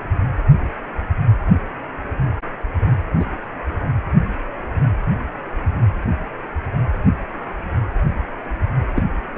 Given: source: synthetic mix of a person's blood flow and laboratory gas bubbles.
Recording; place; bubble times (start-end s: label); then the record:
Doppler ultrasound of blood flow; precordium
3.19-3.25 s: bubbles
8.95-9.03 s: bubbles
9.35-9.38 s: bubbles
From the record:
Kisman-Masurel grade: 122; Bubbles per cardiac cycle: 1 to 2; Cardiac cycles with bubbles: 10 to 50%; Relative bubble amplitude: moderate (0.250 to 0.450); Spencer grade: 2 (many but less than half of the cardiac periods contain bubble signals, singularly or in groups); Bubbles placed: anywhere in the cardiac cycle